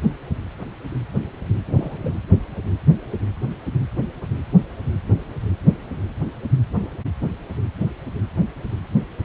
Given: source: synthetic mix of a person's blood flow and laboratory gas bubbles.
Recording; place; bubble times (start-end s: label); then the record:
Doppler ultrasound of blood flow; precordium
1.66-2.16 s: bubbles
From the record:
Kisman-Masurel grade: 111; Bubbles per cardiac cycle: 1 to 2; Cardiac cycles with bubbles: 1 to 10%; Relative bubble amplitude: barely perceptible (0.100 to 0.250); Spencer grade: 1 (occasional bubble signal discernible with the cardiac motion signal, with majority of cardiac periods free of bubbles); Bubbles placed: anywhere in the cardiac cycle